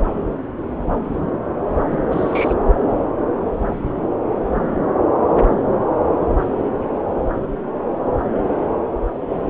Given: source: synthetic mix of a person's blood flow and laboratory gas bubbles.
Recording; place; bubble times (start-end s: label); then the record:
Doppler ultrasound of blood flow; subclavian vein
1.91-2.54 s: bubbles
From the record:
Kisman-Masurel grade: 211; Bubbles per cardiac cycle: several, 3 to 8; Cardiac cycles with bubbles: 1 to 10%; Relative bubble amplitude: barely perceptible (0.100 to 0.250); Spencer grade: 1 (occasional bubble signal discernible with the cardiac motion signal, with majority of cardiac periods free of bubbles); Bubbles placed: anywhere in the cardiac cycle